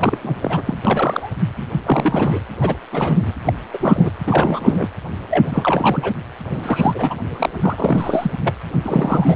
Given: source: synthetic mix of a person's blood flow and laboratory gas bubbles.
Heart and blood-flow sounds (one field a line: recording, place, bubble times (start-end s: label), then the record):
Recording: Doppler ultrasound of blood flow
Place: precordium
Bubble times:
0.00-0.18 s: bubbles
0.21-0.62 s: bubbles
0.65-0.78 s: bubbles
0.85-1.33 s: bubbles
1.57-1.65 s: bubbles
1.85-2.41 s: bubbles
2.61-2.77 s: bubbles
2.92-3.33 s: bubbles
3.45-3.53 s: bubbles
3.73-4.11 s: bubbles
4.25-4.88 s: bubbles
5.30-6.12 s: bubbles
6.50-7.14 s: bubbles
7.31-8.31 s: bubbles
8.44-8.54 s: bubbles
8.83-9.36 s: bubbles
From the record:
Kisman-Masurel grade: 342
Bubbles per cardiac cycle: rolling drumbeat, 9 or more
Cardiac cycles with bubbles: 100%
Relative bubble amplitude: moderate (0.250 to 0.450)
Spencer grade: 3 (all of the cardiac periods contain showers or single bubble signals, but not dominating or overriding the cardiac motion signals)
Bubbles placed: anywhere in the cardiac cycle